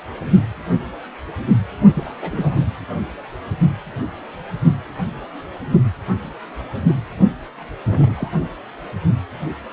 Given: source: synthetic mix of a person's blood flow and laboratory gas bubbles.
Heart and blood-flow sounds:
Doppler ultrasound of blood flow; precordium
1.95-2.13 s: bubbles
2.21-2.64 s: bubbles
6.86-6.95 s: bubbles
7.86-8.29 s: bubbles
From the record:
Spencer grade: 2 (many but less than half of the cardiac periods contain bubble signals, singularly or in groups); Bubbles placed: anywhere in the cardiac cycle

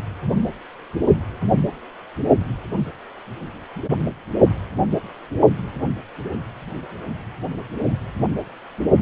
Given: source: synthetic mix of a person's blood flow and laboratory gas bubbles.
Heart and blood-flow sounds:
Doppler ultrasound of blood flow; precordium
no bubbles
From the record:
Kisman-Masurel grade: 000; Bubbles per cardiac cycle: 0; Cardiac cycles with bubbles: 0%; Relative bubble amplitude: no bubbles discernible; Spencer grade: 0 (complete lack of bubble signals)

